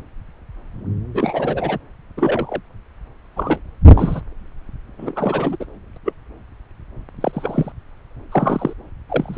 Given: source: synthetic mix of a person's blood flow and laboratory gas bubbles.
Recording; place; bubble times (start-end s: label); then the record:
Doppler ultrasound of blood flow; subclavian vein
1.14-1.78 s: bubbles
2.17-2.60 s: bubbles
3.36-3.60 s: bubbles
3.92-4.21 s: bubbles
4.98-5.56 s: bubbles
5.59-5.65 s: bubbles
6.05-6.13 s: bubbles
7.21-7.72 s: bubbles
8.31-8.73 s: bubbles
9.09-9.38 s: bubbles
From the record:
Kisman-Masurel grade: 232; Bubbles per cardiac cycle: several, 3 to 8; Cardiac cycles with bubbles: 50 to 99%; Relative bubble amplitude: moderate (0.250 to 0.450); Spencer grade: 3 (all of the cardiac periods contain showers or single bubble signals, but not dominating or overriding the cardiac motion signals); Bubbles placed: anywhere in the cardiac cycle